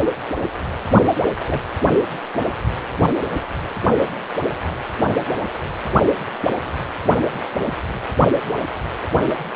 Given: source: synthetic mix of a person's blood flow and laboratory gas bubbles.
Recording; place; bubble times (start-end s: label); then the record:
Doppler ultrasound of blood flow; precordium
1.46-1.61 s: bubbles
From the record:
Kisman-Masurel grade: 112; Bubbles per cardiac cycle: 1 to 2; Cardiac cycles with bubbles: 1 to 10%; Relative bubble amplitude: moderate (0.250 to 0.450); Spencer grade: 1 (occasional bubble signal discernible with the cardiac motion signal, with majority of cardiac periods free of bubbles); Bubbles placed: anywhere in the cardiac cycle